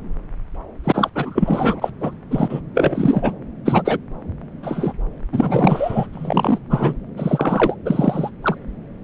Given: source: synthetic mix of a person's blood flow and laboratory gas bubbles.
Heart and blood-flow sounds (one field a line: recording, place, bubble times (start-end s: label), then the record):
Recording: Doppler ultrasound of blood flow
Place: subclavian vein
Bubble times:
0.84-1.10 s: bubbles
1.15-1.90 s: bubbles
2.00-2.15 s: bubbles
2.30-2.60 s: bubbles
2.74-3.33 s: bubbles
3.65-3.82 s: bubbles
3.84-3.98 s: bubbles
4.62-4.93 s: bubbles
5.33-6.07 s: bubbles
6.12-6.59 s: bubbles
6.69-6.93 s: bubbles
7.17-7.75 s: bubbles
7.85-8.31 s: bubbles
8.42-8.56 s: bubbles
From the record:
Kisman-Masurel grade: 243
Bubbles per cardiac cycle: several, 3 to 8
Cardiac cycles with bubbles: 100%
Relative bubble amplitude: loud (0.450 to 0.775)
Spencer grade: 3 (all of the cardiac periods contain showers or single bubble signals, but not dominating or overriding the cardiac motion signals)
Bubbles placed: anywhere in the cardiac cycle